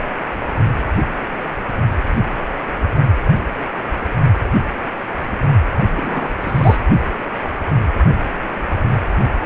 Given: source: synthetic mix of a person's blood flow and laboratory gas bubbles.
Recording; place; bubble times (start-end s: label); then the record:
Doppler ultrasound of blood flow; precordium
5.96-6.29 s: bubbles
6.41-6.79 s: bubbles
From the record:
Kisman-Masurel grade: 212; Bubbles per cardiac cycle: several, 3 to 8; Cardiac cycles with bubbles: 1 to 10%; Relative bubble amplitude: moderate (0.250 to 0.450); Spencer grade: 1 (occasional bubble signal discernible with the cardiac motion signal, with majority of cardiac periods free of bubbles); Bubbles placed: only in the low amplitude regions of the cardiac cycle